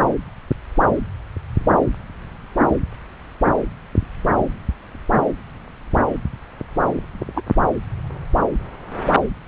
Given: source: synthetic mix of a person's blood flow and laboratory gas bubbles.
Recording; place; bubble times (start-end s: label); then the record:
Doppler ultrasound of blood flow; subclavian vein
7.35-7.42 s: bubbles
From the record:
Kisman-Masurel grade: 112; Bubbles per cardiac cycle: 1 to 2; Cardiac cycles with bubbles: 1 to 10%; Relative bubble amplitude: moderate (0.250 to 0.450); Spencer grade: 1 (occasional bubble signal discernible with the cardiac motion signal, with majority of cardiac periods free of bubbles); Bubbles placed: anywhere in the cardiac cycle